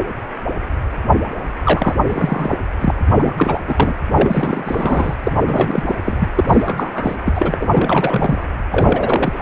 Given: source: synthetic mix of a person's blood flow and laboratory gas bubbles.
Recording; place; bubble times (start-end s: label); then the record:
Doppler ultrasound of blood flow; precordium
1.65-1.93 s: bubbles
2.06-2.60 s: bubbles
2.81-2.91 s: bubbles
3.06-3.60 s: bubbles
3.67-3.93 s: bubbles
4.09-5.15 s: bubbles
5.24-5.32 s: bubbles
5.45-5.95 s: bubbles
6.00-6.28 s: bubbles
6.35-6.44 s: bubbles
6.48-7.16 s: bubbles
7.25-8.44 s: bubbles
8.71-9.42 s: bubbles
From the record:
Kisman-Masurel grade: 333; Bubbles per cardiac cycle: rolling drumbeat, 9 or more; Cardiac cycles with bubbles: 50 to 99%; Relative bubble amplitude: loud (0.450 to 0.775); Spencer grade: 3 (all of the cardiac periods contain showers or single bubble signals, but not dominating or overriding the cardiac motion signals); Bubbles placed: anywhere in the cardiac cycle